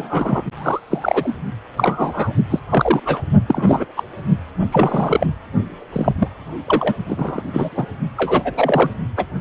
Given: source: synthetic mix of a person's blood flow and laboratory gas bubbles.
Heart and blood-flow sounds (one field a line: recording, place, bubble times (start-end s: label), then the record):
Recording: Doppler ultrasound of blood flow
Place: precordium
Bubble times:
0.00-0.45 s: bubbles
0.56-1.36 s: bubbles
1.77-2.32 s: bubbles
2.50-2.59 s: bubbles
2.69-3.00 s: bubbles
3.05-3.21 s: bubbles
3.46-3.85 s: bubbles
3.96-4.04 s: bubbles
4.72-5.27 s: bubbles
5.92-6.12 s: bubbles
6.18-6.28 s: bubbles
6.67-6.95 s: bubbles
7.08-7.43 s: bubbles
7.53-7.91 s: bubbles
8.17-8.90 s: bubbles
9.17-9.26 s: bubbles
From the record:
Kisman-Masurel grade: 233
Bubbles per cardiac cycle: several, 3 to 8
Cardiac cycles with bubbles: 50 to 99%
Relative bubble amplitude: loud (0.450 to 0.775)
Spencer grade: 3 (all of the cardiac periods contain showers or single bubble signals, but not dominating or overriding the cardiac motion signals)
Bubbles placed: only in the low amplitude regions of the cardiac cycle